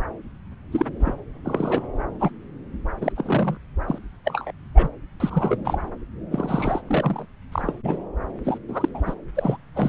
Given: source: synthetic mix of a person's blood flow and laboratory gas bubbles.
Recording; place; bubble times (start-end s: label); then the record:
Doppler ultrasound of blood flow; subclavian vein
0.71-0.86 s: bubbles
0.99-1.15 s: bubbles
1.45-1.86 s: bubbles
2.20-2.31 s: bubbles
3.01-3.12 s: bubbles
3.16-3.58 s: bubbles
3.87-3.99 s: bubbles
4.25-4.52 s: bubbles
4.75-4.89 s: bubbles
5.20-5.79 s: bubbles
6.32-6.82 s: bubbles
6.87-7.25 s: bubbles
7.52-7.74 s: bubbles
7.84-7.98 s: bubbles
8.44-8.57 s: bubbles
8.67-8.88 s: bubbles
8.94-9.01 s: bubbles
9.06-9.14 s: bubbles
9.34-9.57 s: bubbles
9.73-9.89 s: bubbles
From the record:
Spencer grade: 3 (all of the cardiac periods contain showers or single bubble signals, but not dominating or overriding the cardiac motion signals); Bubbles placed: anywhere in the cardiac cycle